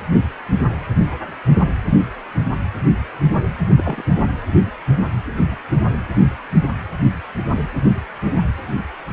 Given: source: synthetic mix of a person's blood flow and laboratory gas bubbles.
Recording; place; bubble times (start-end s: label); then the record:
Doppler ultrasound of blood flow; precordium
3.76-4.03 s: bubbles
From the record:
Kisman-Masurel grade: 211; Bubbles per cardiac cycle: several, 3 to 8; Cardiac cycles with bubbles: 1 to 10%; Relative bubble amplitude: barely perceptible (0.100 to 0.250); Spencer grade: 1 (occasional bubble signal discernible with the cardiac motion signal, with majority of cardiac periods free of bubbles); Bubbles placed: anywhere in the cardiac cycle